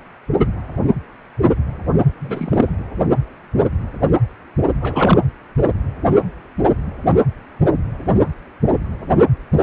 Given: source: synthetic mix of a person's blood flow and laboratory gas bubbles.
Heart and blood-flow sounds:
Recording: Doppler ultrasound of blood flow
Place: precordium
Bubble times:
2.20-2.73 s: bubbles
4.81-5.19 s: bubbles
From the record:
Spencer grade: 2 (many but less than half of the cardiac periods contain bubble signals, singularly or in groups)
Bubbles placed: anywhere in the cardiac cycle

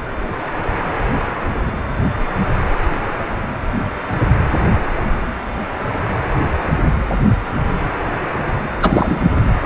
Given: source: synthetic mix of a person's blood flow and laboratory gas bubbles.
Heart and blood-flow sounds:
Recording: Doppler ultrasound of blood flow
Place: precordium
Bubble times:
8.82-9.29 s: bubbles
From the record:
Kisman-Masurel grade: 213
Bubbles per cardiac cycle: several, 3 to 8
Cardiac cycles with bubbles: 1 to 10%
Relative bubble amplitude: loud (0.450 to 0.775)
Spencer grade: 1 (occasional bubble signal discernible with the cardiac motion signal, with majority of cardiac periods free of bubbles)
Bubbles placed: anywhere in the cardiac cycle

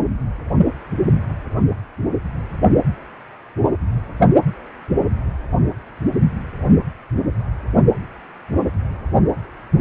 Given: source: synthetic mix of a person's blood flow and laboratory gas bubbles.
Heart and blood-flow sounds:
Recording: Doppler ultrasound of blood flow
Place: precordium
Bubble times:
no bubbles
From the record:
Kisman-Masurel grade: 000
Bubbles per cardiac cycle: 0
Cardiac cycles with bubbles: 0%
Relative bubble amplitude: no bubbles discernible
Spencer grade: 0 (complete lack of bubble signals)

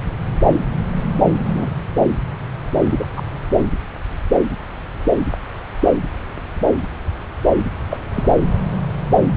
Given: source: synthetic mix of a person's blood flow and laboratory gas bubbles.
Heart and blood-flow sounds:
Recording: Doppler ultrasound of blood flow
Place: subclavian vein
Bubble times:
1.45-1.68 s: bubbles
2.90-3.06 s: bubbles
3.16-3.22 s: bubbles
7.90-7.98 s: bubbles
8.14-8.33 s: bubbles
From the record:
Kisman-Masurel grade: 122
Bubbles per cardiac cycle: 1 to 2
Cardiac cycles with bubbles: 10 to 50%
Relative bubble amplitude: moderate (0.250 to 0.450)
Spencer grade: 2 (many but less than half of the cardiac periods contain bubble signals, singularly or in groups)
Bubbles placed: anywhere in the cardiac cycle

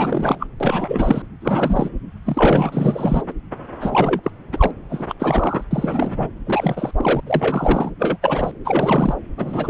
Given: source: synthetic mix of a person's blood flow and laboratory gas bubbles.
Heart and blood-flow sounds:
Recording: Doppler ultrasound of blood flow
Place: subclavian vein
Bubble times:
0.00-0.47 s: bubbles
0.60-1.22 s: bubbles
1.41-1.89 s: bubbles
2.26-3.22 s: bubbles
3.28-3.33 s: bubbles
3.81-4.21 s: bubbles
4.24-4.30 s: bubbles
4.52-4.71 s: bubbles
4.89-5.14 s: bubbles
5.19-5.64 s: bubbles
5.71-6.27 s: bubbles
6.46-6.91 s: bubbles
6.96-7.21 s: bubbles
7.26-7.91 s: bubbles
7.99-8.17 s: bubbles
8.22-8.52 s: bubbles
8.64-9.15 s: bubbles
9.38-9.70 s: bubbles
From the record:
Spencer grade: 3 (all of the cardiac periods contain showers or single bubble signals, but not dominating or overriding the cardiac motion signals)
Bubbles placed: anywhere in the cardiac cycle

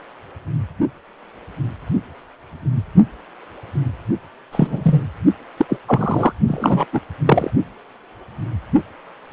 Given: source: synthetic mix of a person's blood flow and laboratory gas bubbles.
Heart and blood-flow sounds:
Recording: Doppler ultrasound of blood flow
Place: precordium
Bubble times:
4.51-5.08 s: bubbles
5.57-5.65 s: bubbles
5.69-5.77 s: bubbles
5.88-6.32 s: bubbles
6.47-6.85 s: bubbles
6.92-7.00 s: bubbles
7.25-7.50 s: bubbles
From the record:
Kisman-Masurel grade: 223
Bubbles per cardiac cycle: several, 3 to 8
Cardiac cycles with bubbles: 10 to 50%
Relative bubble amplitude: loud (0.450 to 0.775)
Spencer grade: 2 (many but less than half of the cardiac periods contain bubble signals, singularly or in groups)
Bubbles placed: only in the low amplitude regions of the cardiac cycle

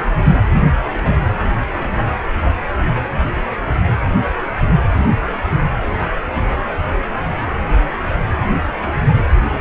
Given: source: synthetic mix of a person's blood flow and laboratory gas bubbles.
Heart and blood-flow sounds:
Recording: Doppler ultrasound of blood flow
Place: precordium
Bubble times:
0.90-1.19 s: bubbles
1.77-2.05 s: bubbles
2.33-2.39 s: bubbles
6.33-6.38 s: bubbles
8.02-8.09 s: bubbles
From the record:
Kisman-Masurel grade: 121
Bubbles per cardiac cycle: 1 to 2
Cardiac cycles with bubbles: 10 to 50%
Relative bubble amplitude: barely perceptible (0.100 to 0.250)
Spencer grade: 2 (many but less than half of the cardiac periods contain bubble signals, singularly or in groups)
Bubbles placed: anywhere in the cardiac cycle

